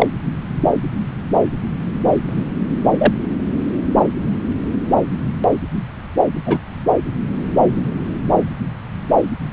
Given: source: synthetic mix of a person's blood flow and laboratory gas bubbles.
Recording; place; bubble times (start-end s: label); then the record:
Doppler ultrasound of blood flow; subclavian vein
0.00-0.07 s: bubbles
2.27-2.42 s: bubbles
2.98-3.13 s: bubbles
6.46-6.60 s: bubbles
From the record:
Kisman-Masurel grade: 123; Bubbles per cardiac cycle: 1 to 2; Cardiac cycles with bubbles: 10 to 50%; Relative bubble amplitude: loud (0.450 to 0.775); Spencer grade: 2 (many but less than half of the cardiac periods contain bubble signals, singularly or in groups); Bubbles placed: anywhere in the cardiac cycle